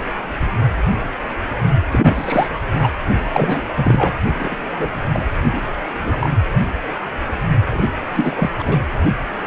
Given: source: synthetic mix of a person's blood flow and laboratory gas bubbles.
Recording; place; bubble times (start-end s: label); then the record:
Doppler ultrasound of blood flow; precordium
1.92-2.48 s: bubbles
2.73-2.90 s: bubbles
3.33-3.62 s: bubbles
3.76-4.13 s: bubbles
4.39-4.56 s: bubbles
4.76-5.02 s: bubbles
5.13-5.25 s: bubbles
5.44-5.70 s: bubbles
5.99-6.28 s: bubbles
7.71-7.86 s: bubbles
8.14-8.50 s: bubbles
8.58-8.79 s: bubbles
From the record:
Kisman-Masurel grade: 332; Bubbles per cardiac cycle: rolling drumbeat, 9 or more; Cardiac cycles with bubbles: 50 to 99%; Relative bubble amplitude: moderate (0.250 to 0.450); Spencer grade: 3 (all of the cardiac periods contain showers or single bubble signals, but not dominating or overriding the cardiac motion signals); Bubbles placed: only in the low amplitude regions of the cardiac cycle